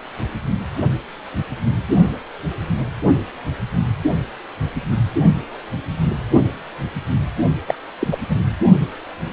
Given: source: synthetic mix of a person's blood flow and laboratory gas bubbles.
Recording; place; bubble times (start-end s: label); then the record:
Doppler ultrasound of blood flow; precordium
7.67-7.75 s: bubbles
8.00-8.07 s: bubbles
8.11-8.19 s: bubbles
8.29-8.37 s: bubbles
From the record:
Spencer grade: 1 (occasional bubble signal discernible with the cardiac motion signal, with majority of cardiac periods free of bubbles); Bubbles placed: only in the low amplitude regions of the cardiac cycle